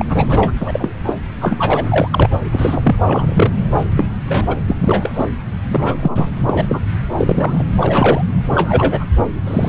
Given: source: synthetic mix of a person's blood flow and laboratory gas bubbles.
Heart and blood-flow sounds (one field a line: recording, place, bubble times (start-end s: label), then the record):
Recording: Doppler ultrasound of blood flow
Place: subclavian vein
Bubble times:
0.00-0.05 s: bubbles
0.09-0.52 s: bubbles
0.60-0.94 s: bubbles
1.05-1.14 s: bubbles
1.41-1.85 s: bubbles
1.89-2.08 s: bubbles
2.12-2.30 s: bubbles
2.51-2.96 s: bubbles
3.06-3.53 s: bubbles
3.97-4.05 s: bubbles
4.29-4.56 s: bubbles
4.67-5.26 s: bubbles
5.69-6.27 s: bubbles
6.47-6.80 s: bubbles
7.17-7.63 s: bubbles
7.76-8.24 s: bubbles
8.46-9.05 s: bubbles
9.46-9.69 s: bubbles
From the record:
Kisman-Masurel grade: 233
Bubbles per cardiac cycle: several, 3 to 8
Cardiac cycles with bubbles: 50 to 99%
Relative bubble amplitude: loud (0.450 to 0.775)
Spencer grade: 3 (all of the cardiac periods contain showers or single bubble signals, but not dominating or overriding the cardiac motion signals)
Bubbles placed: anywhere in the cardiac cycle